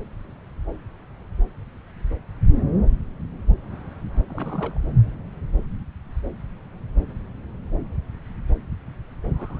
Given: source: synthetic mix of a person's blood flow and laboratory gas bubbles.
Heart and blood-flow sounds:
Doppler ultrasound of blood flow; subclavian vein
4.29-4.79 s: bubbles
9.32-9.60 s: bubbles
From the record:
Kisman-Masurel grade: 221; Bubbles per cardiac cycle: several, 3 to 8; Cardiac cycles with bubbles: 10 to 50%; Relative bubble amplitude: barely perceptible (0.100 to 0.250); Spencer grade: 2 (many but less than half of the cardiac periods contain bubble signals, singularly or in groups); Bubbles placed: anywhere in the cardiac cycle

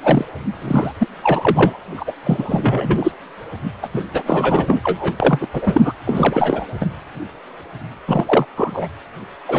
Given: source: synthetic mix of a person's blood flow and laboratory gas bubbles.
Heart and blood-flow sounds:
Doppler ultrasound of blood flow; precordium
0.03-0.25 s: bubbles
0.57-0.91 s: bubbles
0.98-1.08 s: bubbles
1.23-1.77 s: bubbles
1.97-2.04 s: bubbles
2.07-2.12 s: bubbles
2.23-3.12 s: bubbles
3.83-3.88 s: bubbles
3.93-4.04 s: bubbles
4.13-4.80 s: bubbles
4.83-5.15 s: bubbles
5.20-5.48 s: bubbles
5.53-5.93 s: bubbles
6.05-6.66 s: bubbles
6.80-6.87 s: bubbles
8.08-8.46 s: bubbles
8.57-8.88 s: bubbles
9.48-9.58 s: bubbles
From the record:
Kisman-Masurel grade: 333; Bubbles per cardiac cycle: rolling drumbeat, 9 or more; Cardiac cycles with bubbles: 50 to 99%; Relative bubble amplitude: loud (0.450 to 0.775); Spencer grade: 3 (all of the cardiac periods contain showers or single bubble signals, but not dominating or overriding the cardiac motion signals); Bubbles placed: anywhere in the cardiac cycle

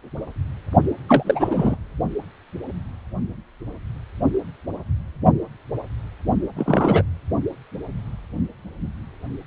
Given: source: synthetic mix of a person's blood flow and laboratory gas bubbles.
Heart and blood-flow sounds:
Doppler ultrasound of blood flow; precordium
1.08-1.76 s: bubbles
6.56-7.04 s: bubbles
From the record:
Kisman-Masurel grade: 223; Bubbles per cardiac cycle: several, 3 to 8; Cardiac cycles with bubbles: 10 to 50%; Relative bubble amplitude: loud (0.450 to 0.775); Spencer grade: 2 (many but less than half of the cardiac periods contain bubble signals, singularly or in groups); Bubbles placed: only in the low amplitude regions of the cardiac cycle

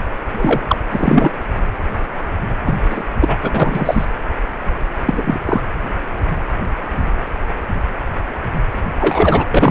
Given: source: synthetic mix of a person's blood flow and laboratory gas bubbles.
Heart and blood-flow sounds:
Doppler ultrasound of blood flow; precordium
0.33-0.61 s: bubbles
0.68-0.78 s: bubbles
0.91-1.33 s: bubbles
2.66-2.73 s: bubbles
2.90-3.04 s: bubbles
3.19-3.36 s: bubbles
3.42-4.05 s: bubbles
5.05-5.40 s: bubbles
5.45-5.60 s: bubbles
9.00-9.45 s: bubbles
9.51-9.70 s: bubbles
From the record:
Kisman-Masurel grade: 233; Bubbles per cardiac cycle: several, 3 to 8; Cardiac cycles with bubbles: 50 to 99%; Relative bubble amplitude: loud (0.450 to 0.775); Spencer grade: 3 (all of the cardiac periods contain showers or single bubble signals, but not dominating or overriding the cardiac motion signals); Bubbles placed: anywhere in the cardiac cycle

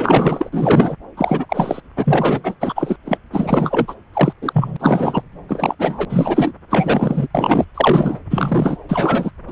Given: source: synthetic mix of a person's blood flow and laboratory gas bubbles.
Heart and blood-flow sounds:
Doppler ultrasound of blood flow; subclavian vein
0.00-0.49 s: bubbles
0.52-0.96 s: bubbles
1.17-1.46 s: bubbles
1.49-1.81 s: bubbles
1.96-2.54 s: bubbles
2.60-2.73 s: bubbles
2.75-2.96 s: bubbles
3.05-3.17 s: bubbles
3.32-3.94 s: bubbles
4.13-4.33 s: bubbles
4.42-4.76 s: bubbles
4.79-5.22 s: bubbles
5.48-5.75 s: bubbles
5.79-6.05 s: bubbles
6.09-6.52 s: bubbles
6.71-7.27 s: bubbles
7.34-7.65 s: bubbles
7.74-8.19 s: bubbles
8.30-8.77 s: bubbles
8.88-9.31 s: bubbles
9.48-9.52 s: bubbles
From the record:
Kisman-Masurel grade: 343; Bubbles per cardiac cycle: rolling drumbeat, 9 or more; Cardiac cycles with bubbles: 100%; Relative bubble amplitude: loud (0.450 to 0.775); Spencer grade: 3 (all of the cardiac periods contain showers or single bubble signals, but not dominating or overriding the cardiac motion signals); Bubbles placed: anywhere in the cardiac cycle

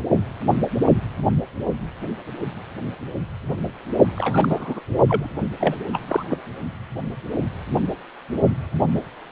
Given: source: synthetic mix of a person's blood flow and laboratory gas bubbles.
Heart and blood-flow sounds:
Doppler ultrasound of blood flow; precordium
4.15-4.80 s: bubbles
5.08-5.27 s: bubbles
5.58-5.76 s: bubbles
5.92-6.00 s: bubbles
6.07-6.23 s: bubbles
6.29-6.38 s: bubbles
From the record:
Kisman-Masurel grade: 222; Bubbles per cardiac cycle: several, 3 to 8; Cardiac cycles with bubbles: 10 to 50%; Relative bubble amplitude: moderate (0.250 to 0.450); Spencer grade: 2 (many but less than half of the cardiac periods contain bubble signals, singularly or in groups); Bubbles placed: only in the low amplitude regions of the cardiac cycle

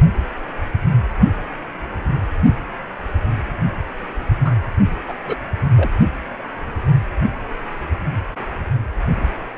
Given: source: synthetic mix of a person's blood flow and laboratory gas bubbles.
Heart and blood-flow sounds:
Doppler ultrasound of blood flow; precordium
4.44-4.55 s: bubbles
5.09-5.13 s: bubbles
5.27-5.36 s: bubbles
5.76-5.91 s: bubbles
From the record:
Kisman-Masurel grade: 212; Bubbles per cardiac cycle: several, 3 to 8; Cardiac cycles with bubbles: 1 to 10%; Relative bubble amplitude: moderate (0.250 to 0.450); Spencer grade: 1 (occasional bubble signal discernible with the cardiac motion signal, with majority of cardiac periods free of bubbles); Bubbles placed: only in the low amplitude regions of the cardiac cycle

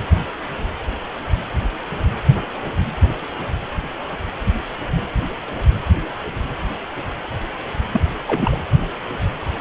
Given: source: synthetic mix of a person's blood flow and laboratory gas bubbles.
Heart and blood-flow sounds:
Doppler ultrasound of blood flow; precordium
7.92-8.01 s: bubbles
8.27-8.59 s: bubbles
From the record:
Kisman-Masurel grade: 212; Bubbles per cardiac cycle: several, 3 to 8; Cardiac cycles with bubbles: 1 to 10%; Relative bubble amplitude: moderate (0.250 to 0.450); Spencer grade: 1 (occasional bubble signal discernible with the cardiac motion signal, with majority of cardiac periods free of bubbles); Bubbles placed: anywhere in the cardiac cycle

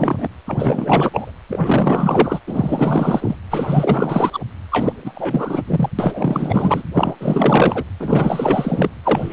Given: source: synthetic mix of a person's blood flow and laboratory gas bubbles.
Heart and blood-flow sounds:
Doppler ultrasound of blood flow; precordium
0.00-0.29 s: bubbles
0.46-1.31 s: bubbles
1.50-2.40 s: bubbles
2.47-3.35 s: bubbles
3.50-4.30 s: bubbles
4.32-4.40 s: bubbles
4.71-4.93 s: bubbles
5.04-5.63 s: bubbles
5.66-5.89 s: bubbles
5.98-6.82 s: bubbles
6.94-7.15 s: bubbles
7.20-7.84 s: bubbles
7.99-8.90 s: bubbles
9.03-9.32 s: bubbles
From the record:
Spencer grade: 4 (maximum detectable bubble signal sounding continuously throughout systole and diastole of every cardiac period, and overriding the amplitude of the normal cardiac signals); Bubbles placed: anywhere in the cardiac cycle

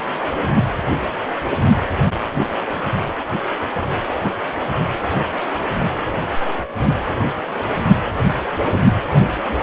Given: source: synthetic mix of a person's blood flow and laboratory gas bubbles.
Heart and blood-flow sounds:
Doppler ultrasound of blood flow; precordium
no bubbles
From the record:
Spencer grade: 0 (complete lack of bubble signals)

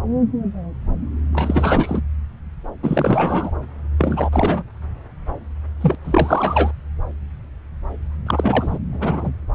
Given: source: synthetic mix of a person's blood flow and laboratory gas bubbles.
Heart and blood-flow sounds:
Doppler ultrasound of blood flow; subclavian vein
1.32-2.01 s: bubbles
2.83-3.52 s: bubbles
3.98-4.64 s: bubbles
5.81-5.96 s: bubbles
6.04-6.73 s: bubbles
8.27-8.78 s: bubbles
8.92-9.31 s: bubbles
From the record:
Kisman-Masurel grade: 333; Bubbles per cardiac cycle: rolling drumbeat, 9 or more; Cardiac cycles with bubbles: 50 to 99%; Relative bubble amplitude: loud (0.450 to 0.775); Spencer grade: 3 (all of the cardiac periods contain showers or single bubble signals, but not dominating or overriding the cardiac motion signals); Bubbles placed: anywhere in the cardiac cycle

